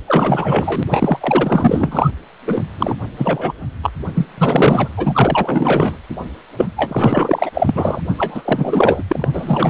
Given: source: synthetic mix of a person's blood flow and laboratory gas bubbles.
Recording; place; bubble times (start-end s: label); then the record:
Doppler ultrasound of blood flow; precordium
0.07-0.83 s: bubbles
0.91-2.10 s: bubbles
2.47-2.61 s: bubbles
2.78-2.95 s: bubbles
3.16-3.53 s: bubbles
3.82-3.90 s: bubbles
4.15-4.27 s: bubbles
4.38-4.89 s: bubbles
4.96-5.96 s: bubbles
6.57-6.67 s: bubbles
6.77-7.50 s: bubbles
7.54-8.00 s: bubbles
8.17-9.04 s: bubbles
9.07-9.28 s: bubbles
9.33-9.70 s: bubbles
From the record:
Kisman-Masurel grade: 444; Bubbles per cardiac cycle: continuous sound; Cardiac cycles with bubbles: 100%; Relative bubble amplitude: maximal (0.775 to 0.999); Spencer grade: 4 (maximum detectable bubble signal sounding continuously throughout systole and diastole of every cardiac period, and overriding the amplitude of the normal cardiac signals); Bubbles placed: anywhere in the cardiac cycle